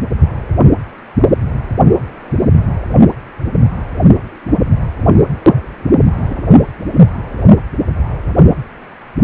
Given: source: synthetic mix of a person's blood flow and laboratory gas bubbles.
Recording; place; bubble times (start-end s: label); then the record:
Doppler ultrasound of blood flow; precordium
6.10-6.35 s: bubbles
From the record:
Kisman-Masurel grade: 113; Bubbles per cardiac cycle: 1 to 2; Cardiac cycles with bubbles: 1 to 10%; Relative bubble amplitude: loud (0.450 to 0.775); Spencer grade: 1 (occasional bubble signal discernible with the cardiac motion signal, with majority of cardiac periods free of bubbles); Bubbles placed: anywhere in the cardiac cycle